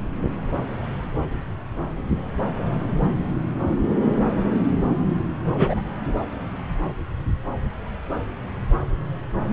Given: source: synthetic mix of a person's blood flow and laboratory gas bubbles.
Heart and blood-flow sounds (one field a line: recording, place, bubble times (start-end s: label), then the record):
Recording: Doppler ultrasound of blood flow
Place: subclavian vein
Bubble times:
5.46-5.81 s: bubbles
From the record:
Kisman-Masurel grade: 212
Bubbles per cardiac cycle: several, 3 to 8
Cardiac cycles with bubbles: 1 to 10%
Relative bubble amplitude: moderate (0.250 to 0.450)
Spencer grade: 1 (occasional bubble signal discernible with the cardiac motion signal, with majority of cardiac periods free of bubbles)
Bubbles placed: anywhere in the cardiac cycle